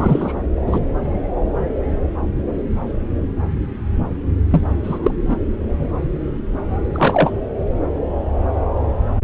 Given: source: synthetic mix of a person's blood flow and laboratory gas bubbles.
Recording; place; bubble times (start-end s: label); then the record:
Doppler ultrasound of blood flow; subclavian vein
0.00-0.33 s: bubbles
0.66-0.80 s: bubbles
4.51-4.64 s: bubbles
4.83-4.99 s: bubbles
5.03-5.11 s: bubbles
5.26-5.37 s: bubbles
6.94-7.32 s: bubbles
From the record:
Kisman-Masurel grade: 223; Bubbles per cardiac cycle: several, 3 to 8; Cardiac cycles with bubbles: 10 to 50%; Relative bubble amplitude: loud (0.450 to 0.775); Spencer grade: 2 (many but less than half of the cardiac periods contain bubble signals, singularly or in groups); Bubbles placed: anywhere in the cardiac cycle